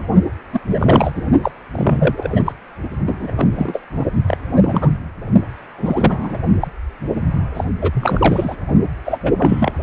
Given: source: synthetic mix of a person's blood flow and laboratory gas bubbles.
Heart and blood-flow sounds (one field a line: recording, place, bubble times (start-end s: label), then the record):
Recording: Doppler ultrasound of blood flow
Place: precordium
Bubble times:
0.00-0.07 s: bubbles
0.52-0.60 s: bubbles
0.67-1.22 s: bubbles
1.43-1.51 s: bubbles
1.72-2.28 s: bubbles
2.32-2.43 s: bubbles
2.46-2.53 s: bubbles
3.06-3.33 s: bubbles
3.36-3.82 s: bubbles
3.93-4.05 s: bubbles
4.26-4.38 s: bubbles
4.56-4.89 s: bubbles
5.77-6.37 s: bubbles
6.60-6.67 s: bubbles
7.54-7.64 s: bubbles
7.81-8.56 s: bubbles
9.05-9.19 s: bubbles
9.22-9.33 s: bubbles
9.38-9.72 s: bubbles
From the record:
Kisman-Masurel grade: 243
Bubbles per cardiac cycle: several, 3 to 8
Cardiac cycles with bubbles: 100%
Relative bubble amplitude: loud (0.450 to 0.775)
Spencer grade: 3 (all of the cardiac periods contain showers or single bubble signals, but not dominating or overriding the cardiac motion signals)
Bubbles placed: only in the low amplitude regions of the cardiac cycle